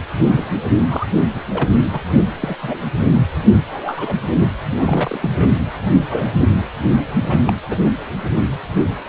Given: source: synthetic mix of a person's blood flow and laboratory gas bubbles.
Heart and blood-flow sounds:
Doppler ultrasound of blood flow; precordium
0.18-0.46 s: bubbles
0.78-1.07 s: bubbles
1.34-1.42 s: bubbles
1.51-1.69 s: bubbles
1.93-2.00 s: bubbles
2.41-2.56 s: bubbles
2.63-2.81 s: bubbles
3.42-3.63 s: bubbles
3.71-4.20 s: bubbles
4.40-4.49 s: bubbles
4.71-5.18 s: bubbles
5.21-5.54 s: bubbles
6.10-6.32 s: bubbles
7.21-7.38 s: bubbles
7.46-7.53 s: bubbles
7.68-7.78 s: bubbles
7.84-7.92 s: bubbles
From the record:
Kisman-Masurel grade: 232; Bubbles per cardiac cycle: several, 3 to 8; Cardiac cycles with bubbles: 50 to 99%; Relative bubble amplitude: moderate (0.250 to 0.450); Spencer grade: 3 (all of the cardiac periods contain showers or single bubble signals, but not dominating or overriding the cardiac motion signals); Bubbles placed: anywhere in the cardiac cycle

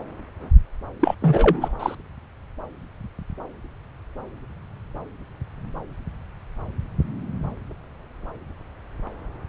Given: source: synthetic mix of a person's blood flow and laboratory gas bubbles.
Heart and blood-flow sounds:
Doppler ultrasound of blood flow; subclavian vein
1.00-1.15 s: bubbles
1.21-1.75 s: bubbles
1.79-1.95 s: bubbles
From the record:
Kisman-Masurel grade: 213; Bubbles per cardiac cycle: several, 3 to 8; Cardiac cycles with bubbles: 1 to 10%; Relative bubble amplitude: loud (0.450 to 0.775); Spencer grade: 1 (occasional bubble signal discernible with the cardiac motion signal, with majority of cardiac periods free of bubbles); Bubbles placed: anywhere in the cardiac cycle

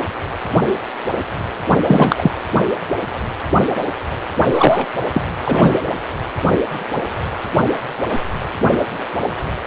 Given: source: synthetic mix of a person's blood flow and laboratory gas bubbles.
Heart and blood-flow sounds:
Doppler ultrasound of blood flow; precordium
1.86-2.15 s: bubbles
2.18-2.31 s: bubbles
4.52-4.87 s: bubbles
5.13-5.23 s: bubbles
5.45-5.79 s: bubbles
From the record:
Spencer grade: 2 (many but less than half of the cardiac periods contain bubble signals, singularly or in groups); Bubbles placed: anywhere in the cardiac cycle

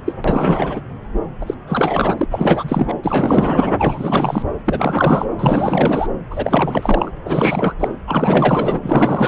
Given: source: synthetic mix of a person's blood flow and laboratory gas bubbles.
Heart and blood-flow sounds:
Doppler ultrasound of blood flow; subclavian vein
0.05-0.13 s: bubbles
0.24-0.81 s: bubbles
1.41-1.54 s: bubbles
1.67-2.26 s: bubbles
2.30-2.94 s: bubbles
3.04-3.74 s: bubbles
3.78-4.42 s: bubbles
4.64-5.26 s: bubbles
5.37-6.08 s: bubbles
6.30-7.11 s: bubbles
7.25-7.73 s: bubbles
7.79-7.88 s: bubbles
8.07-9.28 s: bubbles
From the record:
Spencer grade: 4 (maximum detectable bubble signal sounding continuously throughout systole and diastole of every cardiac period, and overriding the amplitude of the normal cardiac signals); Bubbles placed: anywhere in the cardiac cycle

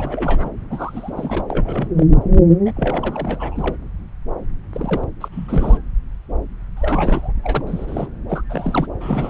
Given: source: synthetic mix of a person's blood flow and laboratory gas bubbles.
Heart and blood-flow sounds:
Doppler ultrasound of blood flow; subclavian vein
0.00-0.49 s: bubbles
0.70-1.44 s: bubbles
1.48-1.89 s: bubbles
1.97-2.06 s: bubbles
2.66-2.72 s: bubbles
2.77-3.75 s: bubbles
4.72-5.04 s: bubbles
5.21-5.28 s: bubbles
5.31-5.78 s: bubbles
6.76-7.32 s: bubbles
7.43-7.64 s: bubbles
7.66-8.08 s: bubbles
8.29-8.43 s: bubbles
8.49-8.87 s: bubbles
9.00-9.30 s: bubbles
From the record:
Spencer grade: 3 (all of the cardiac periods contain showers or single bubble signals, but not dominating or overriding the cardiac motion signals); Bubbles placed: anywhere in the cardiac cycle

